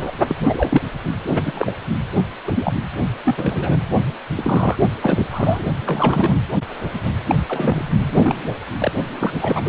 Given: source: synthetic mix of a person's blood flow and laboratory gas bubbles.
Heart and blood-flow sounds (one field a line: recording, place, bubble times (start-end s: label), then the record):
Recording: Doppler ultrasound of blood flow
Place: precordium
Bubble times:
0.00-0.11 s: bubbles
0.28-0.35 s: bubbles
0.40-0.81 s: bubbles
1.27-1.42 s: bubbles
1.44-1.72 s: bubbles
2.47-2.52 s: bubbles
2.55-2.73 s: bubbles
3.24-3.78 s: bubbles
4.33-4.76 s: bubbles
5.02-5.27 s: bubbles
5.31-5.63 s: bubbles
5.79-6.35 s: bubbles
7.05-7.12 s: bubbles
7.27-7.36 s: bubbles
7.48-7.89 s: bubbles
8.07-8.48 s: bubbles
8.79-8.91 s: bubbles
9.20-9.38 s: bubbles
9.41-9.61 s: bubbles
9.65-9.69 s: bubbles
From the record:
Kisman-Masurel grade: 232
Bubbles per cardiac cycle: several, 3 to 8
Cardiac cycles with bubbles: 50 to 99%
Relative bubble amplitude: moderate (0.250 to 0.450)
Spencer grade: 3 (all of the cardiac periods contain showers or single bubble signals, but not dominating or overriding the cardiac motion signals)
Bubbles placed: only in the low amplitude regions of the cardiac cycle